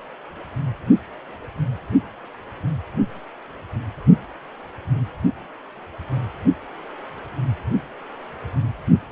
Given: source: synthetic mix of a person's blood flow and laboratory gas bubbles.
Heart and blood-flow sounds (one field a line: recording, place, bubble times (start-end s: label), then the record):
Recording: Doppler ultrasound of blood flow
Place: precordium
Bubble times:
no bubbles
From the record:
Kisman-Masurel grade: 000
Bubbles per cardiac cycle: 0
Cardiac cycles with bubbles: 0%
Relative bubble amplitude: no bubbles discernible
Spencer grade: 0 (complete lack of bubble signals)